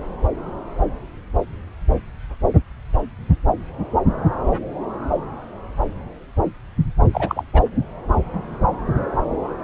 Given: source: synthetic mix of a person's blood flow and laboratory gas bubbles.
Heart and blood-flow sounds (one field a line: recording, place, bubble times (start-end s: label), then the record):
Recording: Doppler ultrasound of blood flow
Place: subclavian vein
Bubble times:
7.12-7.44 s: bubbles
7.54-7.62 s: bubbles
From the record:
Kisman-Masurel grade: 212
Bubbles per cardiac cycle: several, 3 to 8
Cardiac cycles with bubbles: 1 to 10%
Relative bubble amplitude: moderate (0.250 to 0.450)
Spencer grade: 1 (occasional bubble signal discernible with the cardiac motion signal, with majority of cardiac periods free of bubbles)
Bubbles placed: anywhere in the cardiac cycle